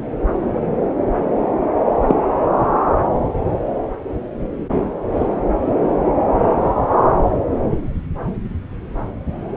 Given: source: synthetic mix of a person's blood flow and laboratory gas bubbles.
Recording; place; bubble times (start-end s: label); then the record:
Doppler ultrasound of blood flow; subclavian vein
2.06-2.15 s: bubbles
From the record:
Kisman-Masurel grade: 113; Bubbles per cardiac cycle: 1 to 2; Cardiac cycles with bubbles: 1 to 10%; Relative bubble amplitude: loud (0.450 to 0.775); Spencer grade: 1 (occasional bubble signal discernible with the cardiac motion signal, with majority of cardiac periods free of bubbles); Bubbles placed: anywhere in the cardiac cycle